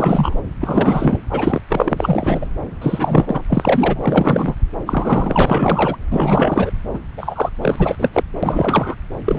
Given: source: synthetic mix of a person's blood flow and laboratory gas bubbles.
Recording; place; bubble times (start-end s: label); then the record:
Doppler ultrasound of blood flow; subclavian vein
0.00-0.35 s: bubbles
0.61-1.19 s: bubbles
1.29-1.61 s: bubbles
1.69-2.47 s: bubbles
2.81-3.42 s: bubbles
3.49-4.56 s: bubbles
4.86-5.96 s: bubbles
6.11-6.71 s: bubbles
6.94-6.99 s: bubbles
7.17-7.49 s: bubbles
7.61-7.96 s: bubbles
7.99-8.09 s: bubbles
8.12-8.23 s: bubbles
8.42-8.95 s: bubbles
9.25-9.39 s: bubbles
From the record:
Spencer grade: 3 (all of the cardiac periods contain showers or single bubble signals, but not dominating or overriding the cardiac motion signals); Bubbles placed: anywhere in the cardiac cycle